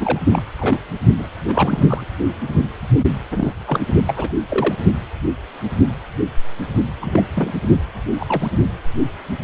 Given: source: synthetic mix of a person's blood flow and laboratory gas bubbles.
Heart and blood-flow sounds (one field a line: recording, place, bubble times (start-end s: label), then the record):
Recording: Doppler ultrasound of blood flow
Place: precordium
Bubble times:
0.00-0.20 s: bubbles
0.25-0.44 s: bubbles
0.57-0.80 s: bubbles
1.19-1.29 s: bubbles
1.48-2.04 s: bubbles
3.31-3.53 s: bubbles
3.67-3.79 s: bubbles
4.08-4.13 s: bubbles
4.16-4.34 s: bubbles
4.49-4.75 s: bubbles
7.00-7.25 s: bubbles
7.34-7.52 s: bubbles
8.16-8.49 s: bubbles
From the record:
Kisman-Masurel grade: 232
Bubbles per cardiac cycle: several, 3 to 8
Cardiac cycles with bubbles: 50 to 99%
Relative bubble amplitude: moderate (0.250 to 0.450)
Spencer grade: 3 (all of the cardiac periods contain showers or single bubble signals, but not dominating or overriding the cardiac motion signals)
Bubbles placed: only in the low amplitude regions of the cardiac cycle